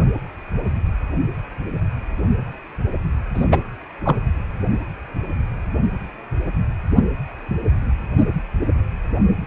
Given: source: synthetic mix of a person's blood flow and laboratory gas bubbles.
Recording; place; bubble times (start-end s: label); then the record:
Doppler ultrasound of blood flow; precordium
3.35-3.46 s: bubbles
3.51-3.62 s: bubbles
4.05-4.16 s: bubbles
From the record:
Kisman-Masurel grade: 213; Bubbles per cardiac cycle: several, 3 to 8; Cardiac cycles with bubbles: 1 to 10%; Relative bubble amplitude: loud (0.450 to 0.775); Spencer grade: 1 (occasional bubble signal discernible with the cardiac motion signal, with majority of cardiac periods free of bubbles); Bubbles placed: anywhere in the cardiac cycle